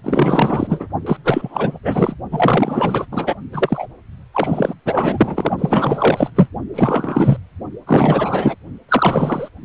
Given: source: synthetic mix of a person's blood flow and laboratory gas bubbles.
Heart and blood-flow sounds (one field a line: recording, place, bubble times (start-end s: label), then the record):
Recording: Doppler ultrasound of blood flow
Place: precordium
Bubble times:
0.03-0.86 s: bubbles
1.06-1.17 s: bubbles
1.24-1.79 s: bubbles
1.83-2.15 s: bubbles
2.31-3.06 s: bubbles
3.12-3.35 s: bubbles
3.52-3.87 s: bubbles
4.34-4.74 s: bubbles
4.85-5.52 s: bubbles
5.58-6.30 s: bubbles
6.35-6.48 s: bubbles
6.74-7.38 s: bubbles
7.87-8.55 s: bubbles
8.88-9.49 s: bubbles
From the record:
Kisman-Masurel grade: 444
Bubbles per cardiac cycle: continuous sound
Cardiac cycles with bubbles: 100%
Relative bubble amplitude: maximal (0.775 to 0.999)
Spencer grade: 4 (maximum detectable bubble signal sounding continuously throughout systole and diastole of every cardiac period, and overriding the amplitude of the normal cardiac signals)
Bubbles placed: only in the low amplitude regions of the cardiac cycle